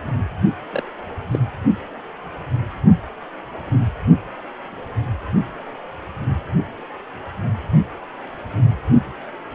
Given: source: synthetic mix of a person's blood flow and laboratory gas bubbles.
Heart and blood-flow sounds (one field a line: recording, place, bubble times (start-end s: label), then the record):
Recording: Doppler ultrasound of blood flow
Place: precordium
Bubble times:
0.72-0.82 s: bubbles
1.31-1.39 s: bubbles
From the record:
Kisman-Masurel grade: 111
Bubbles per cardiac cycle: 1 to 2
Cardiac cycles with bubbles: 1 to 10%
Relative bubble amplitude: barely perceptible (0.100 to 0.250)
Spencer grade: 1 (occasional bubble signal discernible with the cardiac motion signal, with majority of cardiac periods free of bubbles)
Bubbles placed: anywhere in the cardiac cycle